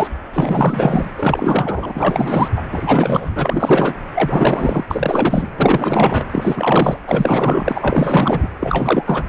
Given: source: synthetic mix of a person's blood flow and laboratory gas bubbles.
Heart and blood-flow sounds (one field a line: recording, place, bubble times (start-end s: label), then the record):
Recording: Doppler ultrasound of blood flow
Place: precordium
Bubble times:
0.00-0.08 s: bubbles
0.33-1.14 s: bubbles
1.18-2.50 s: bubbles
2.56-2.63 s: bubbles
2.72-3.31 s: bubbles
3.35-3.94 s: bubbles
4.15-4.84 s: bubbles
4.90-5.48 s: bubbles
5.57-6.25 s: bubbles
6.30-6.99 s: bubbles
7.07-8.49 s: bubbles
8.60-9.23 s: bubbles
From the record:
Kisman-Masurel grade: 444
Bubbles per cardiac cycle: continuous sound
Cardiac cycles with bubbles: 100%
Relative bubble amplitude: maximal (0.775 to 0.999)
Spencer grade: 4 (maximum detectable bubble signal sounding continuously throughout systole and diastole of every cardiac period, and overriding the amplitude of the normal cardiac signals)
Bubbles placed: anywhere in the cardiac cycle